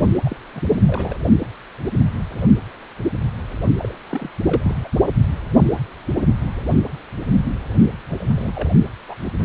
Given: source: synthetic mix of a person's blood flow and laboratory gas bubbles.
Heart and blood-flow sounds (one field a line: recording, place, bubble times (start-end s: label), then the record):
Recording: Doppler ultrasound of blood flow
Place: precordium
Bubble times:
0.24-0.36 s: bubbles
0.54-0.61 s: bubbles
0.87-1.19 s: bubbles
3.77-3.97 s: bubbles
4.10-4.29 s: bubbles
4.45-4.77 s: bubbles
4.84-4.88 s: bubbles
8.10-8.53 s: bubbles
8.55-8.69 s: bubbles
9.08-9.14 s: bubbles
9.39-9.45 s: bubbles
From the record:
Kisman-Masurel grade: 221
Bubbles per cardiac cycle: several, 3 to 8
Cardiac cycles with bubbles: 10 to 50%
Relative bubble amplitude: barely perceptible (0.100 to 0.250)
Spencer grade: 2 (many but less than half of the cardiac periods contain bubble signals, singularly or in groups)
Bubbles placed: only in the low amplitude regions of the cardiac cycle